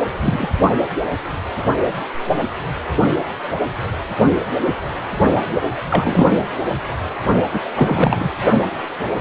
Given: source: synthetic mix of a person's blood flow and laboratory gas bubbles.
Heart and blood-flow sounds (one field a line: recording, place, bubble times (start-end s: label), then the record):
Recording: Doppler ultrasound of blood flow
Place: precordium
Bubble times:
0.18-0.47 s: bubbles
5.50-5.59 s: bubbles
5.89-6.32 s: bubbles
7.53-7.60 s: bubbles
7.75-8.30 s: bubbles
From the record:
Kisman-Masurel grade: 222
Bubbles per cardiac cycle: several, 3 to 8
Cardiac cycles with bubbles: 10 to 50%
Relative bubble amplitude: moderate (0.250 to 0.450)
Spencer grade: 2 (many but less than half of the cardiac periods contain bubble signals, singularly or in groups)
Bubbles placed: only in the low amplitude regions of the cardiac cycle